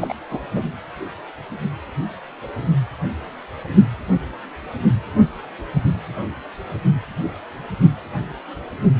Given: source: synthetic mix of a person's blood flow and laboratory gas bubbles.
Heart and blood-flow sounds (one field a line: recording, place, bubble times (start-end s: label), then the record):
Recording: Doppler ultrasound of blood flow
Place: precordium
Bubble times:
0.01-0.14 s: bubbles
0.30-0.40 s: bubbles
0.54-0.62 s: bubbles
From the record:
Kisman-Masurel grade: 212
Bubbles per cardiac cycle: several, 3 to 8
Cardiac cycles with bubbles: 1 to 10%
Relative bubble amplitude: moderate (0.250 to 0.450)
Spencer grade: 1 (occasional bubble signal discernible with the cardiac motion signal, with majority of cardiac periods free of bubbles)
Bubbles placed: anywhere in the cardiac cycle